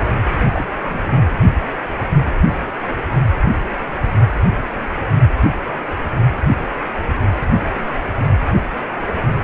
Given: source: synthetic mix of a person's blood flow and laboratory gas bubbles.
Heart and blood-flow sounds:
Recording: Doppler ultrasound of blood flow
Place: precordium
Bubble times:
0.52-0.66 s: bubbles
0.84-1.21 s: bubbles
7.07-7.20 s: bubbles
7.73-8.00 s: bubbles
8.18-8.26 s: bubbles
From the record:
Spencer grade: 2 (many but less than half of the cardiac periods contain bubble signals, singularly or in groups)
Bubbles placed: only in the low amplitude regions of the cardiac cycle

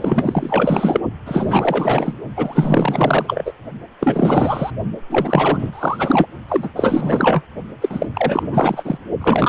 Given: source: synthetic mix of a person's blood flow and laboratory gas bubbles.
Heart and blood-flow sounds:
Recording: Doppler ultrasound of blood flow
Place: precordium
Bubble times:
0.00-1.00 s: bubbles
1.25-2.14 s: bubbles
2.36-3.53 s: bubbles
4.00-4.71 s: bubbles
5.10-6.26 s: bubbles
6.48-6.70 s: bubbles
6.75-7.42 s: bubbles
7.81-8.06 s: bubbles
8.14-8.98 s: bubbles
9.21-9.49 s: bubbles
From the record:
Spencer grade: 4 (maximum detectable bubble signal sounding continuously throughout systole and diastole of every cardiac period, and overriding the amplitude of the normal cardiac signals)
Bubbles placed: only in the low amplitude regions of the cardiac cycle

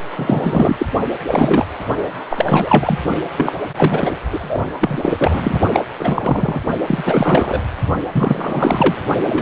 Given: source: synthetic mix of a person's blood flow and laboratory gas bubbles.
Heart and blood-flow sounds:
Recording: Doppler ultrasound of blood flow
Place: precordium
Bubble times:
0.15-0.77 s: bubbles
0.79-0.87 s: bubbles
1.26-1.67 s: bubbles
2.29-2.98 s: bubbles
3.37-3.59 s: bubbles
3.76-4.12 s: bubbles
4.30-4.62 s: bubbles
4.80-5.59 s: bubbles
5.73-5.85 s: bubbles
5.99-6.60 s: bubbles
6.87-7.62 s: bubbles
8.12-8.95 s: bubbles
9.25-9.42 s: bubbles
From the record:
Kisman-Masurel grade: 343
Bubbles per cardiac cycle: rolling drumbeat, 9 or more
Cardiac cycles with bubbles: 100%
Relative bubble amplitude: loud (0.450 to 0.775)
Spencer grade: 3 (all of the cardiac periods contain showers or single bubble signals, but not dominating or overriding the cardiac motion signals)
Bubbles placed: only in the low amplitude regions of the cardiac cycle

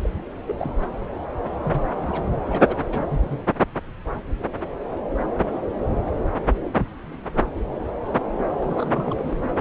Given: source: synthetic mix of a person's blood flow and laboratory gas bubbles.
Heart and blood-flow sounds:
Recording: Doppler ultrasound of blood flow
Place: subclavian vein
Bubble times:
0.03-0.10 s: bubbles
0.47-0.54 s: bubbles
0.57-0.71 s: bubbles
1.63-2.30 s: bubbles
2.47-2.62 s: bubbles
2.67-2.75 s: bubbles
2.87-3.38 s: bubbles
8.51-9.57 s: bubbles
From the record:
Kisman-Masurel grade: 221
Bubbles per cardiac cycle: several, 3 to 8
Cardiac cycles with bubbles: 10 to 50%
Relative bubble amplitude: barely perceptible (0.100 to 0.250)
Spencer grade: 2 (many but less than half of the cardiac periods contain bubble signals, singularly or in groups)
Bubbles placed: anywhere in the cardiac cycle

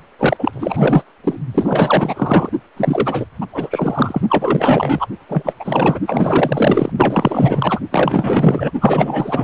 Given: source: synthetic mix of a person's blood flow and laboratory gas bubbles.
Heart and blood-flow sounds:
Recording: Doppler ultrasound of blood flow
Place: precordium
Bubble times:
0.18-1.04 s: bubbles
1.24-1.39 s: bubbles
1.54-2.49 s: bubbles
2.76-3.25 s: bubbles
3.40-3.46 s: bubbles
3.52-4.21 s: bubbles
4.29-5.06 s: bubbles
5.29-5.54 s: bubbles
5.59-6.00 s: bubbles
6.07-6.92 s: bubbles
6.96-7.79 s: bubbles
7.92-8.71 s: bubbles
8.80-9.43 s: bubbles
From the record:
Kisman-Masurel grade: 444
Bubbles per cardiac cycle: continuous sound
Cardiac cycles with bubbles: 100%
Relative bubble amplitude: maximal (0.775 to 0.999)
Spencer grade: 4 (maximum detectable bubble signal sounding continuously throughout systole and diastole of every cardiac period, and overriding the amplitude of the normal cardiac signals)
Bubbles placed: only in the low amplitude regions of the cardiac cycle

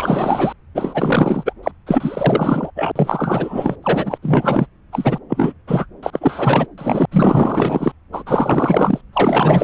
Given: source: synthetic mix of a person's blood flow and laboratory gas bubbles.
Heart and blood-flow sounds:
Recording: Doppler ultrasound of blood flow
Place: subclavian vein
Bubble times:
0.00-0.52 s: bubbles
0.74-1.53 s: bubbles
1.62-1.72 s: bubbles
1.86-2.71 s: bubbles
2.75-2.92 s: bubbles
2.96-3.76 s: bubbles
3.82-4.17 s: bubbles
4.22-4.67 s: bubbles
4.92-5.18 s: bubbles
5.29-5.52 s: bubbles
5.67-5.86 s: bubbles
6.02-6.67 s: bubbles
6.77-7.05 s: bubbles
7.11-7.92 s: bubbles
8.12-8.23 s: bubbles
8.26-9.01 s: bubbles
9.13-9.64 s: bubbles
From the record:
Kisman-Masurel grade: 444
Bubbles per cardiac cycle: continuous sound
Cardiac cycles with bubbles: 100%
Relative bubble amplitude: maximal (0.775 to 0.999)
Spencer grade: 4 (maximum detectable bubble signal sounding continuously throughout systole and diastole of every cardiac period, and overriding the amplitude of the normal cardiac signals)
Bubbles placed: anywhere in the cardiac cycle

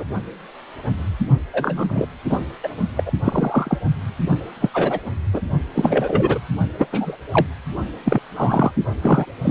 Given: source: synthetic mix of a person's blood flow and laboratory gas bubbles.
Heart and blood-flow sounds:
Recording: Doppler ultrasound of blood flow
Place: precordium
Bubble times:
0.00-0.04 s: bubbles
1.53-2.07 s: bubbles
2.29-2.38 s: bubbles
2.62-2.68 s: bubbles
2.96-3.12 s: bubbles
3.24-3.78 s: bubbles
4.60-4.69 s: bubbles
4.73-4.99 s: bubbles
5.33-5.41 s: bubbles
5.74-6.38 s: bubbles
6.78-6.87 s: bubbles
6.92-7.17 s: bubbles
7.31-7.46 s: bubbles
8.05-8.19 s: bubbles
8.36-8.71 s: bubbles
9.02-9.26 s: bubbles
9.43-9.51 s: bubbles
From the record:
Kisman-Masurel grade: 233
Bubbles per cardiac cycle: several, 3 to 8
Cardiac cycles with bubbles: 50 to 99%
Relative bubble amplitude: loud (0.450 to 0.775)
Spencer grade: 3 (all of the cardiac periods contain showers or single bubble signals, but not dominating or overriding the cardiac motion signals)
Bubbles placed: only in the low amplitude regions of the cardiac cycle

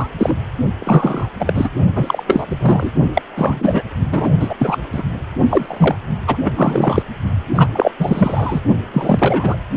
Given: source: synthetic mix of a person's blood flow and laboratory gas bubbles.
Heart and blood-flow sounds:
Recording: Doppler ultrasound of blood flow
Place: precordium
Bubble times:
0.00-0.07 s: bubbles
0.18-0.36 s: bubbles
0.80-1.29 s: bubbles
1.39-1.69 s: bubbles
1.95-2.23 s: bubbles
2.27-2.91 s: bubbles
3.14-3.22 s: bubbles
3.37-3.84 s: bubbles
4.12-4.29 s: bubbles
4.39-4.55 s: bubbles
4.58-4.79 s: bubbles
4.92-5.03 s: bubbles
5.49-5.96 s: bubbles
6.27-6.37 s: bubbles
6.44-6.53 s: bubbles
6.55-7.03 s: bubbles
7.55-7.67 s: bubbles
7.73-7.91 s: bubbles
7.99-8.62 s: bubbles
8.93-9.56 s: bubbles
From the record:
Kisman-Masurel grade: 343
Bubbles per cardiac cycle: rolling drumbeat, 9 or more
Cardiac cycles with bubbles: 100%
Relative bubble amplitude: loud (0.450 to 0.775)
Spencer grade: 3 (all of the cardiac periods contain showers or single bubble signals, but not dominating or overriding the cardiac motion signals)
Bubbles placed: only in the low amplitude regions of the cardiac cycle

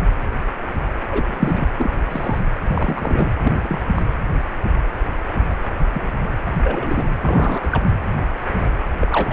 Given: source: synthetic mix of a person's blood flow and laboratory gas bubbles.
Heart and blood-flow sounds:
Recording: Doppler ultrasound of blood flow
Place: precordium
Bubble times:
1.10-1.67 s: bubbles
1.79-1.93 s: bubbles
2.10-2.39 s: bubbles
2.66-3.30 s: bubbles
3.43-3.52 s: bubbles
3.62-3.80 s: bubbles
3.94-4.05 s: bubbles
5.50-5.55 s: bubbles
5.79-5.87 s: bubbles
5.94-6.12 s: bubbles
6.45-6.51 s: bubbles
6.63-7.03 s: bubbles
7.22-7.82 s: bubbles
9.00-9.33 s: bubbles
From the record:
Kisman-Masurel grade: 232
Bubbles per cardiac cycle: several, 3 to 8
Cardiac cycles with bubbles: 50 to 99%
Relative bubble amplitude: moderate (0.250 to 0.450)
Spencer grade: 3 (all of the cardiac periods contain showers or single bubble signals, but not dominating or overriding the cardiac motion signals)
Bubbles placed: anywhere in the cardiac cycle

